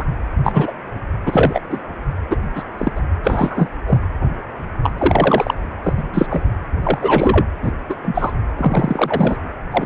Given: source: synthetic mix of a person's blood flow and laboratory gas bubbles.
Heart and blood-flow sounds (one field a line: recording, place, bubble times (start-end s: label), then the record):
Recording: Doppler ultrasound of blood flow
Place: precordium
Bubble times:
0.00-0.04 s: bubbles
0.43-0.75 s: bubbles
1.25-1.61 s: bubbles
1.69-1.79 s: bubbles
2.30-2.37 s: bubbles
2.54-2.63 s: bubbles
2.78-2.92 s: bubbles
2.96-3.00 s: bubbles
3.23-3.69 s: bubbles
3.86-3.98 s: bubbles
4.83-4.92 s: bubbles
4.98-5.54 s: bubbles
5.83-5.94 s: bubbles
5.97-6.03 s: bubbles
6.14-6.27 s: bubbles
6.30-6.45 s: bubbles
6.83-6.99 s: bubbles
7.01-7.45 s: bubbles
7.62-7.74 s: bubbles
7.89-7.95 s: bubbles
8.01-8.34 s: bubbles
8.57-9.37 s: bubbles
9.71-9.86 s: bubbles
From the record:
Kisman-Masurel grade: 243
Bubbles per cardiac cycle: several, 3 to 8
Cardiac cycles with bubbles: 100%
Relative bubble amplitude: loud (0.450 to 0.775)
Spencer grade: 3 (all of the cardiac periods contain showers or single bubble signals, but not dominating or overriding the cardiac motion signals)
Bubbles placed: anywhere in the cardiac cycle